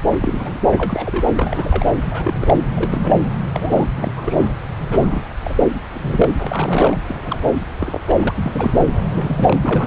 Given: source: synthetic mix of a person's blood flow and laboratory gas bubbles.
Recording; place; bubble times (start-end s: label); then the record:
Doppler ultrasound of blood flow; subclavian vein
0.22-0.60 s: bubbles
0.77-1.29 s: bubbles
1.36-1.86 s: bubbles
2.10-2.61 s: bubbles
2.75-3.17 s: bubbles
3.40-3.87 s: bubbles
3.97-4.12 s: bubbles
4.16-4.50 s: bubbles
4.79-5.30 s: bubbles
5.43-5.67 s: bubbles
5.94-6.34 s: bubbles
6.42-6.98 s: bubbles
7.08-7.21 s: bubbles
7.25-7.60 s: bubbles
7.80-8.01 s: bubbles
8.07-8.86 s: bubbles
9.00-9.58 s: bubbles
9.61-9.87 s: bubbles
From the record:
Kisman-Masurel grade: 242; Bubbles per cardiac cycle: several, 3 to 8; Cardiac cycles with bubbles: 100%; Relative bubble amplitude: moderate (0.250 to 0.450); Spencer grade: 3 (all of the cardiac periods contain showers or single bubble signals, but not dominating or overriding the cardiac motion signals); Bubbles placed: anywhere in the cardiac cycle